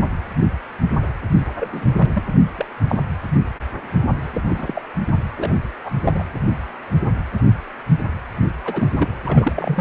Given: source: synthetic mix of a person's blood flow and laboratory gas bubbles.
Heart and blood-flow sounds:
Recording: Doppler ultrasound of blood flow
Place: precordium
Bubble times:
1.60-1.68 s: bubbles
1.72-1.90 s: bubbles
1.97-2.09 s: bubbles
2.13-2.23 s: bubbles
2.58-2.65 s: bubbles
2.88-3.03 s: bubbles
4.33-4.41 s: bubbles
4.48-4.82 s: bubbles
5.37-5.56 s: bubbles
5.86-5.91 s: bubbles
6.03-6.24 s: bubbles
8.64-8.88 s: bubbles
8.92-9.07 s: bubbles
9.25-9.81 s: bubbles
From the record:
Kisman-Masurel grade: 232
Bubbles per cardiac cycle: several, 3 to 8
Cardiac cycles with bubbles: 50 to 99%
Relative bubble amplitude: moderate (0.250 to 0.450)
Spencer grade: 3 (all of the cardiac periods contain showers or single bubble signals, but not dominating or overriding the cardiac motion signals)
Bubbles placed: anywhere in the cardiac cycle

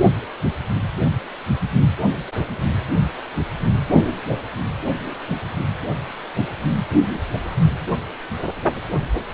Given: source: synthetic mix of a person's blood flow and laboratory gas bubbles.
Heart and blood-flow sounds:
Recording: Doppler ultrasound of blood flow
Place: precordium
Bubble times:
no bubbles
From the record:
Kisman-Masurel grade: 000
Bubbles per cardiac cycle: 0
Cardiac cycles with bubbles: 0%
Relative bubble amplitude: no bubbles discernible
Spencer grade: 0 (complete lack of bubble signals)

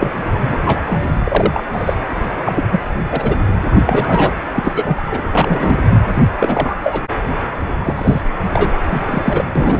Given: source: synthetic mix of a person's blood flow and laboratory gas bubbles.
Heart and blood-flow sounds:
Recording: Doppler ultrasound of blood flow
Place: precordium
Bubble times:
0.00-0.11 s: bubbles
0.40-0.57 s: bubbles
0.65-0.81 s: bubbles
0.87-1.64 s: bubbles
1.73-1.94 s: bubbles
2.44-2.64 s: bubbles
2.71-2.81 s: bubbles
3.11-3.35 s: bubbles
3.48-3.53 s: bubbles
3.86-4.34 s: bubbles
4.54-4.96 s: bubbles
5.06-5.22 s: bubbles
5.31-5.77 s: bubbles
5.90-6.02 s: bubbles
6.38-6.74 s: bubbles
6.83-7.02 s: bubbles
7.79-8.21 s: bubbles
8.53-8.79 s: bubbles
8.87-9.44 s: bubbles
9.55-9.80 s: bubbles
From the record:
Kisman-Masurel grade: 243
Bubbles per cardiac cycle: several, 3 to 8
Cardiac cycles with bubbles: 100%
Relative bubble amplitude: loud (0.450 to 0.775)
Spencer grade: 3 (all of the cardiac periods contain showers or single bubble signals, but not dominating or overriding the cardiac motion signals)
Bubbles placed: anywhere in the cardiac cycle

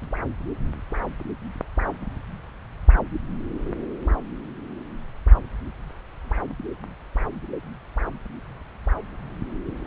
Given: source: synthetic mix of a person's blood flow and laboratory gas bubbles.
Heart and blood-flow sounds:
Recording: Doppler ultrasound of blood flow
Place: subclavian vein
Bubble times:
no bubbles
From the record:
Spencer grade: 0 (complete lack of bubble signals)

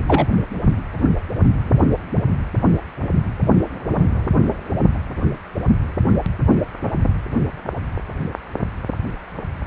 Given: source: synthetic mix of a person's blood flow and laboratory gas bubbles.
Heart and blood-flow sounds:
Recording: Doppler ultrasound of blood flow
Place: precordium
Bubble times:
0.07-0.27 s: bubbles
From the record:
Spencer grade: 1 (occasional bubble signal discernible with the cardiac motion signal, with majority of cardiac periods free of bubbles)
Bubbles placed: anywhere in the cardiac cycle

